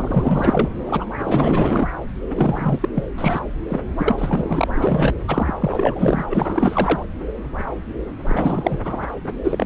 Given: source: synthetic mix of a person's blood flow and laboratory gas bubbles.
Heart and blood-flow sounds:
Doppler ultrasound of blood flow; subclavian vein
0.00-0.69 s: bubbles
0.86-1.06 s: bubbles
1.18-1.86 s: bubbles
2.30-2.90 s: bubbles
2.95-3.04 s: bubbles
3.18-3.40 s: bubbles
3.68-3.80 s: bubbles
3.98-5.10 s: bubbles
5.27-5.54 s: bubbles
5.60-6.25 s: bubbles
6.30-7.03 s: bubbles
8.25-9.09 s: bubbles
9.24-9.33 s: bubbles
9.44-9.66 s: bubbles
From the record:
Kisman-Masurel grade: 444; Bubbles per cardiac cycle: continuous sound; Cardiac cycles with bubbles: 100%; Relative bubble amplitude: maximal (0.775 to 0.999); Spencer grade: 4 (maximum detectable bubble signal sounding continuously throughout systole and diastole of every cardiac period, and overriding the amplitude of the normal cardiac signals); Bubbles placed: anywhere in the cardiac cycle

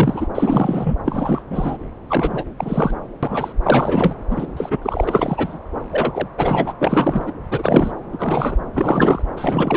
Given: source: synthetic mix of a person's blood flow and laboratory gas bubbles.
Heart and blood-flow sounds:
Doppler ultrasound of blood flow; subclavian vein
0.00-0.28 s: bubbles
0.35-0.96 s: bubbles
1.06-1.42 s: bubbles
1.50-1.78 s: bubbles
2.09-2.45 s: bubbles
2.58-2.94 s: bubbles
3.23-3.53 s: bubbles
3.62-4.17 s: bubbles
4.30-4.46 s: bubbles
4.56-4.79 s: bubbles
4.81-5.59 s: bubbles
5.90-6.28 s: bubbles
6.38-6.73 s: bubbles
6.80-7.32 s: bubbles
7.50-7.92 s: bubbles
8.12-8.57 s: bubbles
8.73-9.22 s: bubbles
9.37-9.77 s: bubbles
From the record:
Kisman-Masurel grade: 343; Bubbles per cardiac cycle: rolling drumbeat, 9 or more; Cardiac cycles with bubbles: 100%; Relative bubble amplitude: loud (0.450 to 0.775); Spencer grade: 3 (all of the cardiac periods contain showers or single bubble signals, but not dominating or overriding the cardiac motion signals); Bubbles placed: anywhere in the cardiac cycle

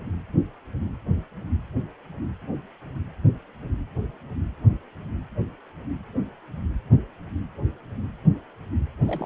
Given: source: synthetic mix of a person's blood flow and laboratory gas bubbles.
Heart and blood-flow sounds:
Doppler ultrasound of blood flow; precordium
9.06-9.26 s: bubbles
From the record:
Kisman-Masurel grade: 211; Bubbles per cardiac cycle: several, 3 to 8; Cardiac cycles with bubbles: 1 to 10%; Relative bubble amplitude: barely perceptible (0.100 to 0.250); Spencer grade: 1 (occasional bubble signal discernible with the cardiac motion signal, with majority of cardiac periods free of bubbles); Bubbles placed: anywhere in the cardiac cycle

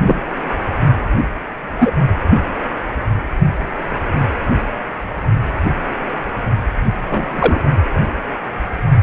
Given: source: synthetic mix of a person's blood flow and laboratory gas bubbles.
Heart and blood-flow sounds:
Doppler ultrasound of blood flow; precordium
0.03-0.20 s: bubbles
1.80-1.91 s: bubbles
7.08-7.61 s: bubbles
From the record:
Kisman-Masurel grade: 123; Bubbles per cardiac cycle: 1 to 2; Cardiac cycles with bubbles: 10 to 50%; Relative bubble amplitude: loud (0.450 to 0.775); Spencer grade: 2 (many but less than half of the cardiac periods contain bubble signals, singularly or in groups); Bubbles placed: anywhere in the cardiac cycle

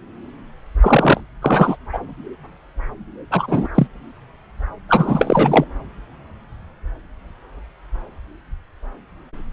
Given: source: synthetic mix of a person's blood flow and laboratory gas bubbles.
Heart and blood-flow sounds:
Doppler ultrasound of blood flow; subclavian vein
0.80-1.21 s: bubbles
1.42-1.76 s: bubbles
1.93-1.99 s: bubbles
3.30-3.67 s: bubbles
3.75-3.87 s: bubbles
4.88-5.64 s: bubbles
From the record:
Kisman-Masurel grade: 223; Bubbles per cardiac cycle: several, 3 to 8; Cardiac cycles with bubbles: 10 to 50%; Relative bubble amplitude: loud (0.450 to 0.775); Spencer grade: 2 (many but less than half of the cardiac periods contain bubble signals, singularly or in groups); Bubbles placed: anywhere in the cardiac cycle

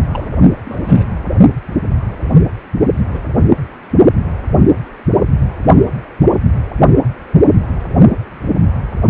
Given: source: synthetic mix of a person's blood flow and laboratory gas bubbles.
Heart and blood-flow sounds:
Doppler ultrasound of blood flow; precordium
0.13-0.27 s: bubbles
0.66-1.05 s: bubbles
3.11-3.20 s: bubbles
From the record:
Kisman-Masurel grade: 121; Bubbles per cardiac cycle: 1 to 2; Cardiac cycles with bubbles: 10 to 50%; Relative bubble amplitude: barely perceptible (0.100 to 0.250); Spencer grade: 2 (many but less than half of the cardiac periods contain bubble signals, singularly or in groups); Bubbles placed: only in the low amplitude regions of the cardiac cycle

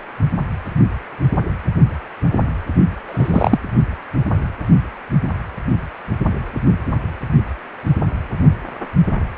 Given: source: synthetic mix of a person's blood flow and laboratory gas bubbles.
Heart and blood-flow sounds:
Doppler ultrasound of blood flow; precordium
3.07-3.60 s: bubbles
From the record:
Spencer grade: 2 (many but less than half of the cardiac periods contain bubble signals, singularly or in groups); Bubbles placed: only in the low amplitude regions of the cardiac cycle

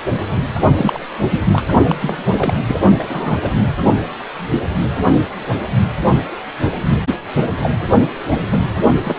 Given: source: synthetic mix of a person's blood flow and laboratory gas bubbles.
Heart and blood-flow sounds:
Doppler ultrasound of blood flow; precordium
0.75-1.06 s: bubbles
1.30-1.40 s: bubbles
1.51-1.67 s: bubbles
1.89-1.96 s: bubbles
2.02-2.17 s: bubbles
2.31-2.77 s: bubbles
2.98-3.38 s: bubbles
3.42-3.50 s: bubbles
7.62-7.71 s: bubbles
7.91-7.98 s: bubbles
8.30-8.38 s: bubbles
8.49-8.60 s: bubbles
9.05-9.19 s: bubbles
From the record:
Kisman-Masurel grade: 232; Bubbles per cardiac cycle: several, 3 to 8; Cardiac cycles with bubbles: 50 to 99%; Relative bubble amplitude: moderate (0.250 to 0.450); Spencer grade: 3 (all of the cardiac periods contain showers or single bubble signals, but not dominating or overriding the cardiac motion signals); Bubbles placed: only in the low amplitude regions of the cardiac cycle

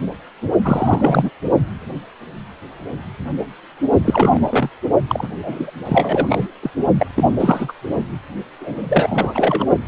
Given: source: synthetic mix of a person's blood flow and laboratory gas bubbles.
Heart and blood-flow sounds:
Doppler ultrasound of blood flow; precordium
0.62-1.30 s: bubbles
4.04-4.70 s: bubbles
5.08-5.28 s: bubbles
5.38-5.71 s: bubbles
5.84-6.51 s: bubbles
6.62-6.71 s: bubbles
6.99-7.07 s: bubbles
7.15-7.73 s: bubbles
8.60-9.66 s: bubbles
9.86-9.88 s: bubbles
From the record:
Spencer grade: 3 (all of the cardiac periods contain showers or single bubble signals, but not dominating or overriding the cardiac motion signals); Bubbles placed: only in the low amplitude regions of the cardiac cycle

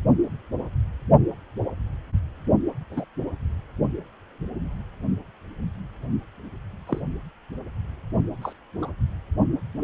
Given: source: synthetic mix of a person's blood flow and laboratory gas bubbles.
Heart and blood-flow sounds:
Doppler ultrasound of blood flow; precordium
2.90-3.05 s: bubbles
6.88-7.01 s: bubbles
8.42-8.53 s: bubbles
8.82-8.91 s: bubbles
From the record:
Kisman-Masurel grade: 121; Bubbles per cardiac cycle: 1 to 2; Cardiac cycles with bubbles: 10 to 50%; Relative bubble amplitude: barely perceptible (0.100 to 0.250); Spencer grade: 2 (many but less than half of the cardiac periods contain bubble signals, singularly or in groups); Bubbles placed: only in the low amplitude regions of the cardiac cycle

